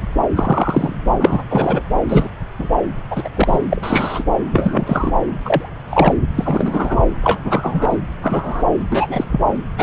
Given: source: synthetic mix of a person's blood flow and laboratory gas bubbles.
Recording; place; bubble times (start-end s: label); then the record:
Doppler ultrasound of blood flow; subclavian vein
0.35-0.93 s: bubbles
1.19-1.43 s: bubbles
1.49-1.83 s: bubbles
2.09-2.28 s: bubbles
2.59-2.69 s: bubbles
3.10-3.29 s: bubbles
3.35-3.58 s: bubbles
3.71-4.24 s: bubbles
4.53-5.12 s: bubbles
5.45-5.68 s: bubbles
5.89-6.13 s: bubbles
6.35-6.97 s: bubbles
7.23-7.41 s: bubbles
7.45-7.99 s: bubbles
8.23-8.62 s: bubbles
8.91-9.25 s: bubbles
9.31-9.40 s: bubbles
9.78-9.83 s: bubbles
From the record:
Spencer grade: 3 (all of the cardiac periods contain showers or single bubble signals, but not dominating or overriding the cardiac motion signals); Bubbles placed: anywhere in the cardiac cycle